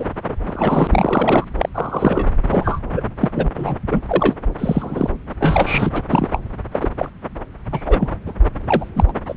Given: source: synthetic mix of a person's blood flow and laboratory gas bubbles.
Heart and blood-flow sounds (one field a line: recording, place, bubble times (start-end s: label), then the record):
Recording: Doppler ultrasound of blood flow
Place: subclavian vein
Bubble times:
0.00-0.05 s: bubbles
0.29-0.34 s: bubbles
0.45-0.88 s: bubbles
0.90-1.44 s: bubbles
1.58-1.69 s: bubbles
1.75-2.27 s: bubbles
2.50-2.79 s: bubbles
2.91-3.00 s: bubbles
3.20-3.50 s: bubbles
3.55-3.76 s: bubbles
3.91-4.00 s: bubbles
4.08-4.35 s: bubbles
4.58-5.10 s: bubbles
5.40-5.89 s: bubbles
5.93-6.03 s: bubbles
6.08-6.29 s: bubbles
6.32-6.40 s: bubbles
6.72-6.89 s: bubbles
6.98-7.10 s: bubbles
7.71-8.17 s: bubbles
8.26-8.33 s: bubbles
8.67-8.85 s: bubbles
8.96-9.04 s: bubbles
9.08-9.12 s: bubbles
9.28-9.34 s: bubbles
From the record:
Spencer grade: 3 (all of the cardiac periods contain showers or single bubble signals, but not dominating or overriding the cardiac motion signals)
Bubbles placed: anywhere in the cardiac cycle